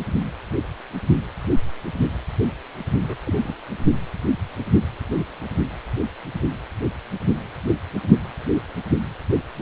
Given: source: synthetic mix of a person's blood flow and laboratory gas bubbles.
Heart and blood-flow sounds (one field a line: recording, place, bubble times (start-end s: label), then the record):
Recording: Doppler ultrasound of blood flow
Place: precordium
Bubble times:
3.02-3.17 s: bubbles
3.25-3.53 s: bubbles
From the record:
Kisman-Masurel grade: 211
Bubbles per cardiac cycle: several, 3 to 8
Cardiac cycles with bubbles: 1 to 10%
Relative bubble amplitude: barely perceptible (0.100 to 0.250)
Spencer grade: 1 (occasional bubble signal discernible with the cardiac motion signal, with majority of cardiac periods free of bubbles)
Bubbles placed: only in the low amplitude regions of the cardiac cycle